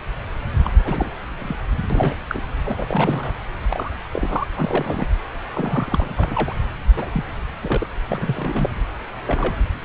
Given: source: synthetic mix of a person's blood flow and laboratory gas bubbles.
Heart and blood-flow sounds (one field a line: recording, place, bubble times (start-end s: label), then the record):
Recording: Doppler ultrasound of blood flow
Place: subclavian vein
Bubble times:
0.65-0.71 s: bubbles
0.85-1.11 s: bubbles
1.39-1.56 s: bubbles
1.90-2.15 s: bubbles
2.29-2.42 s: bubbles
2.65-3.34 s: bubbles
3.71-3.91 s: bubbles
4.13-4.47 s: bubbles
4.51-4.54 s: bubbles
4.56-5.06 s: bubbles
5.53-6.55 s: bubbles
6.96-7.10 s: bubbles
7.14-7.24 s: bubbles
7.62-7.87 s: bubbles
8.09-8.69 s: bubbles
9.26-9.54 s: bubbles
From the record:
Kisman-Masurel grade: 242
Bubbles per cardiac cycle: several, 3 to 8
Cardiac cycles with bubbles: 100%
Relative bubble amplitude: moderate (0.250 to 0.450)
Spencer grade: 3 (all of the cardiac periods contain showers or single bubble signals, but not dominating or overriding the cardiac motion signals)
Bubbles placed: anywhere in the cardiac cycle